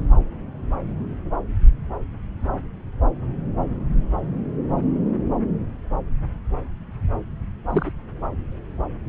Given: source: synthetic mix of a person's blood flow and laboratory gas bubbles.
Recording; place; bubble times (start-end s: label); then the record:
Doppler ultrasound of blood flow; subclavian vein
7.70-7.92 s: bubbles
From the record:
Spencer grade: 1 (occasional bubble signal discernible with the cardiac motion signal, with majority of cardiac periods free of bubbles); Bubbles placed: anywhere in the cardiac cycle